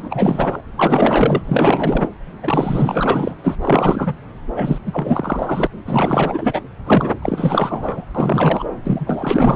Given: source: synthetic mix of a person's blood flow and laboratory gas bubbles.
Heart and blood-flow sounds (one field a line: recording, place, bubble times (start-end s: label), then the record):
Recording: Doppler ultrasound of blood flow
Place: subclavian vein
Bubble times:
0.00-0.62 s: bubbles
0.77-1.42 s: bubbles
1.46-2.08 s: bubbles
2.43-3.34 s: bubbles
3.44-3.56 s: bubbles
3.61-4.13 s: bubbles
4.53-4.78 s: bubbles
4.86-5.67 s: bubbles
5.85-6.62 s: bubbles
6.86-7.10 s: bubbles
7.21-8.05 s: bubbles
8.15-8.68 s: bubbles
8.84-9.56 s: bubbles
From the record:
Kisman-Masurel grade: 444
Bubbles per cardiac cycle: continuous sound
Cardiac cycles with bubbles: 100%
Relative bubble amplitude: maximal (0.775 to 0.999)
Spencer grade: 4 (maximum detectable bubble signal sounding continuously throughout systole and diastole of every cardiac period, and overriding the amplitude of the normal cardiac signals)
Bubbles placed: anywhere in the cardiac cycle